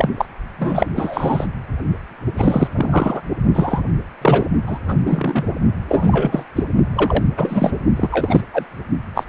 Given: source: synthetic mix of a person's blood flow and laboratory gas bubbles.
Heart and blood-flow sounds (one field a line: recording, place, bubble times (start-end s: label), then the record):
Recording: Doppler ultrasound of blood flow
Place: precordium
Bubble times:
0.00-0.10 s: bubbles
0.17-0.26 s: bubbles
0.58-0.90 s: bubbles
0.95-1.47 s: bubbles
2.37-2.68 s: bubbles
2.75-3.21 s: bubbles
3.54-3.81 s: bubbles
4.21-4.46 s: bubbles
4.66-4.79 s: bubbles
4.88-4.95 s: bubbles
5.05-5.44 s: bubbles
5.88-6.46 s: bubbles
6.55-6.63 s: bubbles
6.95-7.24 s: bubbles
7.37-7.73 s: bubbles
7.96-8.41 s: bubbles
8.53-8.66 s: bubbles
9.14-9.24 s: bubbles
From the record:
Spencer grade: 3 (all of the cardiac periods contain showers or single bubble signals, but not dominating or overriding the cardiac motion signals)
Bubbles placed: only in the low amplitude regions of the cardiac cycle